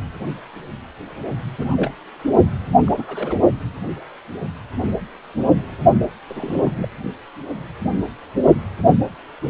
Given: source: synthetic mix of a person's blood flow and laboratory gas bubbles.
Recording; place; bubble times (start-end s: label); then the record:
Doppler ultrasound of blood flow; precordium
1.58-1.66 s: bubbles
1.70-1.92 s: bubbles
2.85-3.04 s: bubbles
3.08-3.36 s: bubbles
6.28-6.88 s: bubbles
From the record:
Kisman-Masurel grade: 221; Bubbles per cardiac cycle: several, 3 to 8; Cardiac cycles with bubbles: 10 to 50%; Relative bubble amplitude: barely perceptible (0.100 to 0.250); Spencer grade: 2 (many but less than half of the cardiac periods contain bubble signals, singularly or in groups); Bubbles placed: only in the low amplitude regions of the cardiac cycle